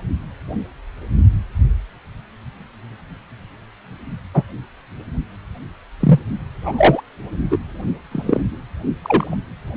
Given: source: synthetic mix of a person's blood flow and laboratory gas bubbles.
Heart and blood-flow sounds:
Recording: Doppler ultrasound of blood flow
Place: precordium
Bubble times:
4.33-4.44 s: bubbles
6.00-6.20 s: bubbles
6.62-7.01 s: bubbles
7.50-7.58 s: bubbles
8.11-8.42 s: bubbles
9.04-9.36 s: bubbles
From the record:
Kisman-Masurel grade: 123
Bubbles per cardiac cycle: 1 to 2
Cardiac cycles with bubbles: 10 to 50%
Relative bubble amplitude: loud (0.450 to 0.775)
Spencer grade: 2 (many but less than half of the cardiac periods contain bubble signals, singularly or in groups)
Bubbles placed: only in the low amplitude regions of the cardiac cycle

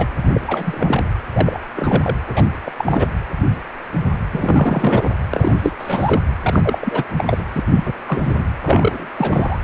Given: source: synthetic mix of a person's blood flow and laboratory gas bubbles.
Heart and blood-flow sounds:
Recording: Doppler ultrasound of blood flow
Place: precordium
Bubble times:
0.00-0.07 s: bubbles
0.22-0.30 s: bubbles
0.33-0.41 s: bubbles
0.46-1.05 s: bubbles
1.32-1.60 s: bubbles
1.76-2.16 s: bubbles
2.25-2.42 s: bubbles
2.64-2.72 s: bubbles
2.78-3.08 s: bubbles
4.32-5.12 s: bubbles
5.33-5.54 s: bubbles
5.58-5.72 s: bubbles
5.79-6.21 s: bubbles
6.42-7.04 s: bubbles
7.17-7.42 s: bubbles
7.52-7.63 s: bubbles
7.71-7.93 s: bubbles
8.06-8.44 s: bubbles
8.63-9.07 s: bubbles
9.18-9.59 s: bubbles
From the record:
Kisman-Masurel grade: 333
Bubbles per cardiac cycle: rolling drumbeat, 9 or more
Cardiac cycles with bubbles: 50 to 99%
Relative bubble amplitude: loud (0.450 to 0.775)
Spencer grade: 3 (all of the cardiac periods contain showers or single bubble signals, but not dominating or overriding the cardiac motion signals)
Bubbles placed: anywhere in the cardiac cycle

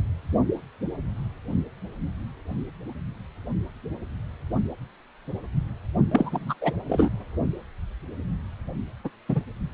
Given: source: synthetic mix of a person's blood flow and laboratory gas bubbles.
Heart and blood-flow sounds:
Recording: Doppler ultrasound of blood flow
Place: precordium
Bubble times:
6.11-6.54 s: bubbles
6.61-6.72 s: bubbles
6.88-7.09 s: bubbles
9.04-9.10 s: bubbles
9.29-9.42 s: bubbles
From the record:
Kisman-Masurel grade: 222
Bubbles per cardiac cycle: several, 3 to 8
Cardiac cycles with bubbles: 10 to 50%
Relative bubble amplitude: moderate (0.250 to 0.450)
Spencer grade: 2 (many but less than half of the cardiac periods contain bubble signals, singularly or in groups)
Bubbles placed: only in the low amplitude regions of the cardiac cycle

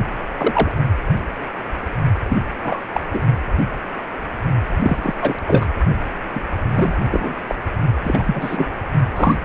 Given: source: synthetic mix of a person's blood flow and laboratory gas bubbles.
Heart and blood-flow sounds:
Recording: Doppler ultrasound of blood flow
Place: precordium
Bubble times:
0.39-0.71 s: bubbles
2.29-2.38 s: bubbles
2.62-2.83 s: bubbles
2.92-3.00 s: bubbles
3.13-3.22 s: bubbles
4.75-5.14 s: bubbles
5.21-5.38 s: bubbles
5.47-5.67 s: bubbles
6.35-6.41 s: bubbles
6.75-7.01 s: bubbles
7.11-7.33 s: bubbles
7.47-7.55 s: bubbles
8.04-8.81 s: bubbles
9.16-9.35 s: bubbles
From the record:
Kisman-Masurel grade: 233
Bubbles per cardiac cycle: several, 3 to 8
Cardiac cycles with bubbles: 50 to 99%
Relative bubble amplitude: loud (0.450 to 0.775)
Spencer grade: 3 (all of the cardiac periods contain showers or single bubble signals, but not dominating or overriding the cardiac motion signals)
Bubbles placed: only in the low amplitude regions of the cardiac cycle

